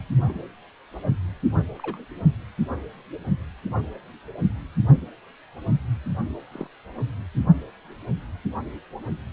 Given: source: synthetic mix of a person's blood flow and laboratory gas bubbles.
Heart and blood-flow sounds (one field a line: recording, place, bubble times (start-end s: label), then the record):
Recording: Doppler ultrasound of blood flow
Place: precordium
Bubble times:
0.18-0.22 s: bubbles
0.26-0.34 s: bubbles
1.78-1.99 s: bubbles
6.51-6.67 s: bubbles
From the record:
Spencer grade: 2 (many but less than half of the cardiac periods contain bubble signals, singularly or in groups)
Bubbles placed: only in the low amplitude regions of the cardiac cycle